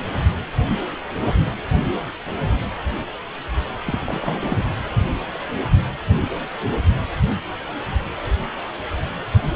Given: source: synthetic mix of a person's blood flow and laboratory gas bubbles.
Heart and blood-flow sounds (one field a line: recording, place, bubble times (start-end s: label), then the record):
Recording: Doppler ultrasound of blood flow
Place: precordium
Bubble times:
3.86-3.99 s: bubbles
4.06-4.63 s: bubbles
From the record:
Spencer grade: 1 (occasional bubble signal discernible with the cardiac motion signal, with majority of cardiac periods free of bubbles)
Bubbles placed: anywhere in the cardiac cycle